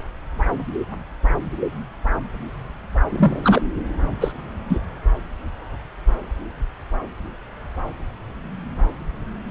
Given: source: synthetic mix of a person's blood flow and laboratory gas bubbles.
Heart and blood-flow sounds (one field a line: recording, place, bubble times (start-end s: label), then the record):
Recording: Doppler ultrasound of blood flow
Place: subclavian vein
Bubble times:
3.10-3.60 s: bubbles
4.20-4.32 s: bubbles
4.69-4.79 s: bubbles
From the record:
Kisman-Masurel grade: 123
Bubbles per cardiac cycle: 1 to 2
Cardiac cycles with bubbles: 10 to 50%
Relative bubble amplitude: loud (0.450 to 0.775)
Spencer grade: 2 (many but less than half of the cardiac periods contain bubble signals, singularly or in groups)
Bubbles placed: anywhere in the cardiac cycle